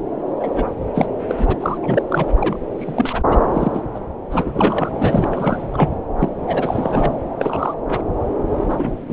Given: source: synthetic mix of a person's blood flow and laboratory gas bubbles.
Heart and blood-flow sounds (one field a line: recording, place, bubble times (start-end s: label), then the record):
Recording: Doppler ultrasound of blood flow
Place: subclavian vein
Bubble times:
0.40-0.67 s: bubbles
0.95-1.08 s: bubbles
1.27-1.57 s: bubbles
1.60-1.78 s: bubbles
1.82-2.03 s: bubbles
2.10-2.29 s: bubbles
2.36-2.67 s: bubbles
2.78-3.22 s: bubbles
3.29-3.37 s: bubbles
3.53-3.82 s: bubbles
3.94-4.00 s: bubbles
4.31-4.89 s: bubbles
4.99-5.67 s: bubbles
5.73-5.96 s: bubbles
6.19-6.29 s: bubbles
6.47-7.12 s: bubbles
7.39-7.75 s: bubbles
7.89-8.04 s: bubbles
8.69-8.76 s: bubbles
8.79-8.91 s: bubbles
9.08-9.13 s: bubbles
From the record:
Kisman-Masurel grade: 242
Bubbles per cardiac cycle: several, 3 to 8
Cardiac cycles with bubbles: 100%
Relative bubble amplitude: moderate (0.250 to 0.450)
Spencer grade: 3 (all of the cardiac periods contain showers or single bubble signals, but not dominating or overriding the cardiac motion signals)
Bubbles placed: anywhere in the cardiac cycle